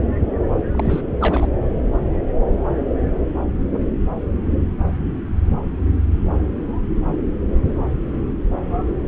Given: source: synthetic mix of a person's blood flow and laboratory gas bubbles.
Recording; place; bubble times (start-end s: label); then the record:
Doppler ultrasound of blood flow; subclavian vein
0.72-1.04 s: bubbles
1.21-1.48 s: bubbles
From the record:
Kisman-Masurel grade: 212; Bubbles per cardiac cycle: several, 3 to 8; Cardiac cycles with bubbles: 1 to 10%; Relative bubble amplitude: moderate (0.250 to 0.450); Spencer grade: 1 (occasional bubble signal discernible with the cardiac motion signal, with majority of cardiac periods free of bubbles); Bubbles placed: anywhere in the cardiac cycle